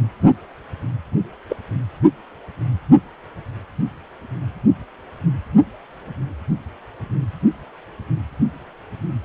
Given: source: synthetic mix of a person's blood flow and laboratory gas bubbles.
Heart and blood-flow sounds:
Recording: Doppler ultrasound of blood flow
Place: precordium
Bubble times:
1.48-1.56 s: bubbles
From the record:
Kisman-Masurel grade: 112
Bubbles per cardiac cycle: 1 to 2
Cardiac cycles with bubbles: 1 to 10%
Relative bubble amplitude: moderate (0.250 to 0.450)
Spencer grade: 1 (occasional bubble signal discernible with the cardiac motion signal, with majority of cardiac periods free of bubbles)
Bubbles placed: only in the low amplitude regions of the cardiac cycle

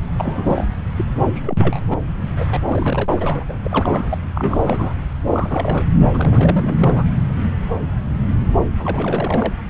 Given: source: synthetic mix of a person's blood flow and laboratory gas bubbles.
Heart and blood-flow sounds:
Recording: Doppler ultrasound of blood flow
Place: subclavian vein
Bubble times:
0.17-0.66 s: bubbles
0.68-0.74 s: bubbles
0.97-1.05 s: bubbles
1.15-1.41 s: bubbles
1.44-1.56 s: bubbles
1.59-1.79 s: bubbles
1.90-1.98 s: bubbles
2.37-2.60 s: bubbles
2.65-3.09 s: bubbles
3.17-3.44 s: bubbles
3.49-3.53 s: bubbles
3.64-4.18 s: bubbles
4.34-4.94 s: bubbles
5.23-5.87 s: bubbles
6.12-7.04 s: bubbles
8.79-9.53 s: bubbles
From the record:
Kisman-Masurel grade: 332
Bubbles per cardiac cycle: rolling drumbeat, 9 or more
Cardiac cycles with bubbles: 50 to 99%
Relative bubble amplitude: moderate (0.250 to 0.450)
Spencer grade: 3 (all of the cardiac periods contain showers or single bubble signals, but not dominating or overriding the cardiac motion signals)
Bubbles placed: anywhere in the cardiac cycle

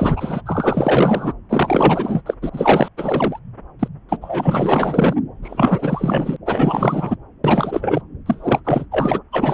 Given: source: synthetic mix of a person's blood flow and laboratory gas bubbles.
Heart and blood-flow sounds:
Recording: Doppler ultrasound of blood flow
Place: subclavian vein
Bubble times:
0.00-0.42 s: bubbles
0.45-1.33 s: bubbles
1.49-2.22 s: bubbles
2.26-2.34 s: bubbles
2.42-2.50 s: bubbles
2.52-2.89 s: bubbles
2.97-3.39 s: bubbles
3.79-3.88 s: bubbles
4.08-4.17 s: bubbles
4.21-5.14 s: bubbles
5.42-6.36 s: bubbles
6.45-7.16 s: bubbles
7.44-8.02 s: bubbles
8.26-8.62 s: bubbles
8.65-8.86 s: bubbles
8.91-9.20 s: bubbles
9.32-9.54 s: bubbles
From the record:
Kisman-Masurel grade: 444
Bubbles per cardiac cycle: continuous sound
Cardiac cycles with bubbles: 100%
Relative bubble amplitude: maximal (0.775 to 0.999)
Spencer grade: 4 (maximum detectable bubble signal sounding continuously throughout systole and diastole of every cardiac period, and overriding the amplitude of the normal cardiac signals)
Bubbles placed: anywhere in the cardiac cycle

